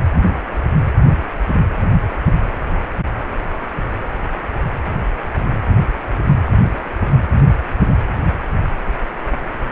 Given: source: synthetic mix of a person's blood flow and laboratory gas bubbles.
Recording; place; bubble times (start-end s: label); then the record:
Doppler ultrasound of blood flow; precordium
no bubbles
From the record:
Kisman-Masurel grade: 000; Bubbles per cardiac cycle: 0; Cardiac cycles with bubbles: 0%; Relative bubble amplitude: no bubbles discernible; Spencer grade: 0 (complete lack of bubble signals)